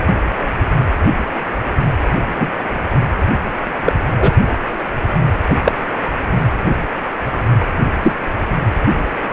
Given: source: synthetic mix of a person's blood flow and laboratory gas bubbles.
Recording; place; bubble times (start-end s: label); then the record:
Doppler ultrasound of blood flow; precordium
2.39-2.50 s: bubbles
3.85-3.93 s: bubbles
4.20-4.32 s: bubbles
5.49-5.54 s: bubbles
5.65-5.72 s: bubbles
8.02-8.12 s: bubbles
From the record:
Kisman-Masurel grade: 123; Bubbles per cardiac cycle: 1 to 2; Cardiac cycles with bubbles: 10 to 50%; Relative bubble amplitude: loud (0.450 to 0.775); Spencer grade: 2 (many but less than half of the cardiac periods contain bubble signals, singularly or in groups); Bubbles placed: anywhere in the cardiac cycle